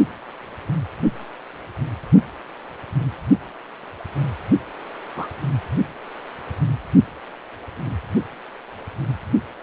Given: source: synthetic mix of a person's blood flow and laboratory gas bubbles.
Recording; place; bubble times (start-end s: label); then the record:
Doppler ultrasound of blood flow; precordium
5.16-5.27 s: bubbles
From the record:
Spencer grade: 1 (occasional bubble signal discernible with the cardiac motion signal, with majority of cardiac periods free of bubbles); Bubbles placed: only in the low amplitude regions of the cardiac cycle